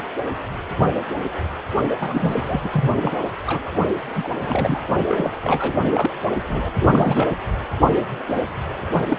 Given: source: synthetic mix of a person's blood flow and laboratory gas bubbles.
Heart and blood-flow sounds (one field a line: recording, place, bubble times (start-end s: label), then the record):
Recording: Doppler ultrasound of blood flow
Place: precordium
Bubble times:
2.00-2.70 s: bubbles
2.73-2.98 s: bubbles
3.02-3.22 s: bubbles
3.47-3.73 s: bubbles
4.15-4.29 s: bubbles
4.42-4.79 s: bubbles
5.07-5.31 s: bubbles
5.42-5.80 s: bubbles
5.93-6.10 s: bubbles
6.48-6.70 s: bubbles
6.81-7.35 s: bubbles
9.08-9.17 s: bubbles
From the record:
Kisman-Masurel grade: 332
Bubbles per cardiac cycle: rolling drumbeat, 9 or more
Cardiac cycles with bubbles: 50 to 99%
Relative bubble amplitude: moderate (0.250 to 0.450)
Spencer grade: 3 (all of the cardiac periods contain showers or single bubble signals, but not dominating or overriding the cardiac motion signals)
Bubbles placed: only in the low amplitude regions of the cardiac cycle